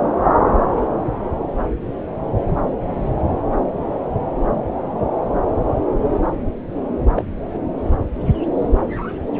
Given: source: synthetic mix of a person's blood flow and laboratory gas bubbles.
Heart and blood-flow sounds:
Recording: Doppler ultrasound of blood flow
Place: subclavian vein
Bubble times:
7.16-7.24 s: bubbles
From the record:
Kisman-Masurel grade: 112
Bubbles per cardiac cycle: 1 to 2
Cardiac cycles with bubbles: 1 to 10%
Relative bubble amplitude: moderate (0.250 to 0.450)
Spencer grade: 1 (occasional bubble signal discernible with the cardiac motion signal, with majority of cardiac periods free of bubbles)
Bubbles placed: anywhere in the cardiac cycle

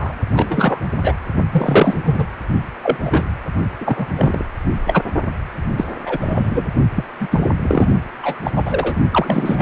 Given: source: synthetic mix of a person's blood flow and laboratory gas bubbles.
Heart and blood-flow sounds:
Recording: Doppler ultrasound of blood flow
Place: precordium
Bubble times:
0.00-0.16 s: bubbles
0.33-0.80 s: bubbles
1.02-1.14 s: bubbles
1.52-2.02 s: bubbles
2.06-2.25 s: bubbles
2.83-2.97 s: bubbles
3.03-3.33 s: bubbles
3.80-4.07 s: bubbles
4.17-4.45 s: bubbles
4.87-5.03 s: bubbles
5.76-5.85 s: bubbles
6.06-6.17 s: bubbles
6.20-6.67 s: bubbles
6.95-7.04 s: bubbles
7.20-7.47 s: bubbles
7.62-7.86 s: bubbles
8.22-8.39 s: bubbles
8.44-8.50 s: bubbles
8.55-8.96 s: bubbles
9.11-9.62 s: bubbles
From the record:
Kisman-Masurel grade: 243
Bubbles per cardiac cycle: several, 3 to 8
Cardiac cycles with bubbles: 100%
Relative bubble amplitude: loud (0.450 to 0.775)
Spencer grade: 3 (all of the cardiac periods contain showers or single bubble signals, but not dominating or overriding the cardiac motion signals)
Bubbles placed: only in the low amplitude regions of the cardiac cycle

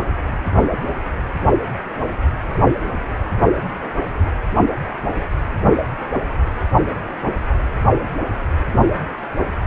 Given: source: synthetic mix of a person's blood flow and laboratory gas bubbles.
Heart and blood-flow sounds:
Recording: Doppler ultrasound of blood flow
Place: precordium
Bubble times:
no bubbles
From the record:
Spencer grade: 0 (complete lack of bubble signals)

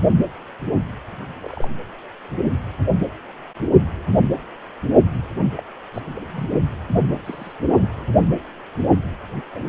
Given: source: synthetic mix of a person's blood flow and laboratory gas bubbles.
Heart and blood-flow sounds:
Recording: Doppler ultrasound of blood flow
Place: precordium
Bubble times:
1.40-1.68 s: bubbles
5.55-5.62 s: bubbles
5.94-6.00 s: bubbles
6.16-6.47 s: bubbles
7.24-7.53 s: bubbles
7.75-7.94 s: bubbles
9.55-9.63 s: bubbles
From the record:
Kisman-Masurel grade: 121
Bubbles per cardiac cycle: 1 to 2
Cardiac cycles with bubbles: 10 to 50%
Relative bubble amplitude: barely perceptible (0.100 to 0.250)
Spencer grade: 2 (many but less than half of the cardiac periods contain bubble signals, singularly or in groups)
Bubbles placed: anywhere in the cardiac cycle

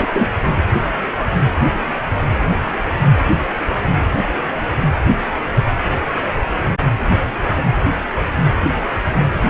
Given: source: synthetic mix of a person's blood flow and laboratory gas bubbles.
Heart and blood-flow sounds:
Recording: Doppler ultrasound of blood flow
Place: precordium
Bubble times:
0.00-0.09 s: bubbles
0.13-0.30 s: bubbles
From the record:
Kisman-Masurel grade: 212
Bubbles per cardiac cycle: several, 3 to 8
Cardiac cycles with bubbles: 1 to 10%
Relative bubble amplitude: moderate (0.250 to 0.450)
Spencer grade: 1 (occasional bubble signal discernible with the cardiac motion signal, with majority of cardiac periods free of bubbles)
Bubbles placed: anywhere in the cardiac cycle

